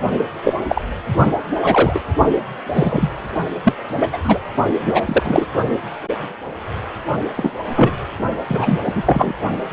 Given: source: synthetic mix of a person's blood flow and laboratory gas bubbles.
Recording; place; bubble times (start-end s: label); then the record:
Doppler ultrasound of blood flow; precordium
0.43-0.55 s: bubbles
0.68-0.82 s: bubbles
1.60-2.00 s: bubbles
2.74-3.12 s: bubbles
3.63-3.73 s: bubbles
4.00-4.08 s: bubbles
4.12-4.18 s: bubbles
4.23-4.39 s: bubbles
4.81-5.01 s: bubbles
5.05-5.46 s: bubbles
7.36-7.52 s: bubbles
7.75-7.91 s: bubbles
8.47-8.79 s: bubbles
8.87-8.92 s: bubbles
8.95-9.03 s: bubbles
9.05-9.33 s: bubbles
9.71-9.73 s: bubbles
From the record:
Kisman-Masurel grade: 233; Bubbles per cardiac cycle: several, 3 to 8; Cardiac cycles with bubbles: 50 to 99%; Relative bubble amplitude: loud (0.450 to 0.775); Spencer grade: 3 (all of the cardiac periods contain showers or single bubble signals, but not dominating or overriding the cardiac motion signals); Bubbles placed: only in the low amplitude regions of the cardiac cycle